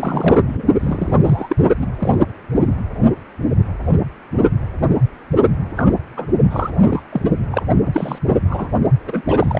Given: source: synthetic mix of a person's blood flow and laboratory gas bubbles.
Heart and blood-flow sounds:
Doppler ultrasound of blood flow; precordium
0.00-0.64 s: bubbles
0.80-1.15 s: bubbles
1.23-1.56 s: bubbles
1.79-1.87 s: bubbles
1.99-2.19 s: bubbles
5.76-5.92 s: bubbles
6.17-6.26 s: bubbles
6.50-6.71 s: bubbles
6.83-7.03 s: bubbles
7.12-7.22 s: bubbles
7.25-7.30 s: bubbles
7.52-7.63 s: bubbles
7.85-8.18 s: bubbles
8.28-8.36 s: bubbles
8.47-8.68 s: bubbles
9.06-9.21 s: bubbles
9.27-9.60 s: bubbles
From the record:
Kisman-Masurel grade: 232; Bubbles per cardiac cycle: several, 3 to 8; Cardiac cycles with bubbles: 50 to 99%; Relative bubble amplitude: moderate (0.250 to 0.450); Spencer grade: 3 (all of the cardiac periods contain showers or single bubble signals, but not dominating or overriding the cardiac motion signals); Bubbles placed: only in the low amplitude regions of the cardiac cycle

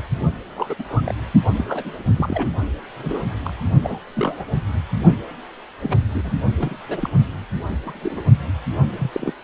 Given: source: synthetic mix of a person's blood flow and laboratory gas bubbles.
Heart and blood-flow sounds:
Doppler ultrasound of blood flow; precordium
0.38-0.74 s: bubbles
0.78-0.83 s: bubbles
0.88-1.02 s: bubbles
1.06-1.15 s: bubbles
1.56-2.03 s: bubbles
2.16-2.51 s: bubbles
2.99-3.23 s: bubbles
3.44-3.63 s: bubbles
3.81-3.99 s: bubbles
4.16-4.45 s: bubbles
5.80-6.03 s: bubbles
6.14-6.33 s: bubbles
6.55-6.77 s: bubbles
6.88-7.10 s: bubbles
7.84-8.22 s: bubbles
8.99-9.11 s: bubbles
9.13-9.33 s: bubbles
From the record:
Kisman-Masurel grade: 242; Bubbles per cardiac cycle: several, 3 to 8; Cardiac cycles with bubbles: 100%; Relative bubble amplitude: moderate (0.250 to 0.450); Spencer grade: 3 (all of the cardiac periods contain showers or single bubble signals, but not dominating or overriding the cardiac motion signals); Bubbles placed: only in the low amplitude regions of the cardiac cycle

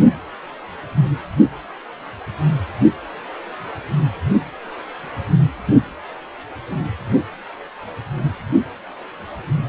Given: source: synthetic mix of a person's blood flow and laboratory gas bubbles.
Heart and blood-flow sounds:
Doppler ultrasound of blood flow; precordium
no bubbles
From the record:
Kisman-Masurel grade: 000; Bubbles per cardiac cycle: 0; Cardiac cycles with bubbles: 0%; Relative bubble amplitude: no bubbles discernible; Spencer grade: 0 (complete lack of bubble signals)

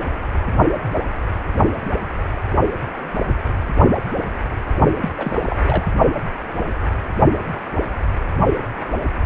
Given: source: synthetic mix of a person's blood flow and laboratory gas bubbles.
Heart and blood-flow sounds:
Doppler ultrasound of blood flow; precordium
5.01-5.09 s: bubbles
5.18-5.90 s: bubbles
From the record:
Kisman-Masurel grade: 211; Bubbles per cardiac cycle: several, 3 to 8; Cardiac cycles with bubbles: 1 to 10%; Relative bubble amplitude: barely perceptible (0.100 to 0.250); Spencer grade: 1 (occasional bubble signal discernible with the cardiac motion signal, with majority of cardiac periods free of bubbles); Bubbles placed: only in the low amplitude regions of the cardiac cycle

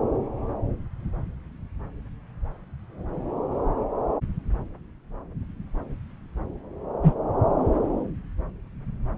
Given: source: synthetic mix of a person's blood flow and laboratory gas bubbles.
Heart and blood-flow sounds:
Doppler ultrasound of blood flow; subclavian vein
7.03-7.13 s: bubbles
From the record:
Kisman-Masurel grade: 123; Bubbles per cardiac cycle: 1 to 2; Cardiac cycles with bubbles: 10 to 50%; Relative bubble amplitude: loud (0.450 to 0.775); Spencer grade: 2 (many but less than half of the cardiac periods contain bubble signals, singularly or in groups); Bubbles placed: anywhere in the cardiac cycle

